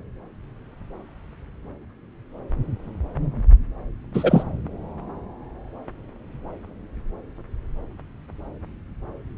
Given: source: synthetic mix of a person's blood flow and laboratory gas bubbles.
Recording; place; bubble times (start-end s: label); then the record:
Doppler ultrasound of blood flow; subclavian vein
4.13-4.44 s: bubbles
From the record:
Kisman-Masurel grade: 213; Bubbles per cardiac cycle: several, 3 to 8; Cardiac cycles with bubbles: 1 to 10%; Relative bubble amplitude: loud (0.450 to 0.775); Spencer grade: 1 (occasional bubble signal discernible with the cardiac motion signal, with majority of cardiac periods free of bubbles); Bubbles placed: anywhere in the cardiac cycle